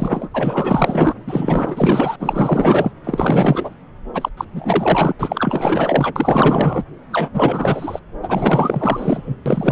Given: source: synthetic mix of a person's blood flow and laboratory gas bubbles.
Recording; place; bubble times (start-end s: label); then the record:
Doppler ultrasound of blood flow; subclavian vein
0.00-0.29 s: bubbles
0.34-1.14 s: bubbles
1.26-2.16 s: bubbles
2.20-2.92 s: bubbles
3.04-3.75 s: bubbles
4.13-4.29 s: bubbles
4.37-4.45 s: bubbles
4.53-5.12 s: bubbles
5.19-6.84 s: bubbles
7.10-7.30 s: bubbles
7.33-8.00 s: bubbles
8.22-9.36 s: bubbles
9.46-9.72 s: bubbles
From the record:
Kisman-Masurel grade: 444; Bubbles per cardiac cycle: continuous sound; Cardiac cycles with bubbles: 100%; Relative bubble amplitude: maximal (0.775 to 0.999); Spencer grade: 4 (maximum detectable bubble signal sounding continuously throughout systole and diastole of every cardiac period, and overriding the amplitude of the normal cardiac signals); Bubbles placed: anywhere in the cardiac cycle